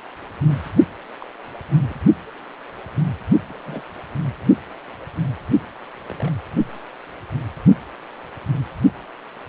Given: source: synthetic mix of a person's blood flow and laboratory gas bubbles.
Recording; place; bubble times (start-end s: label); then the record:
Doppler ultrasound of blood flow; precordium
0.48-0.56 s: bubbles
1.19-1.28 s: bubbles
1.89-1.99 s: bubbles
3.03-3.13 s: bubbles
3.48-3.82 s: bubbles
6.09-6.31 s: bubbles
From the record:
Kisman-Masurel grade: 121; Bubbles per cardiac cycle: 1 to 2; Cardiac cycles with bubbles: 10 to 50%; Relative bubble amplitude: barely perceptible (0.100 to 0.250); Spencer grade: 2 (many but less than half of the cardiac periods contain bubble signals, singularly or in groups); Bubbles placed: only in the low amplitude regions of the cardiac cycle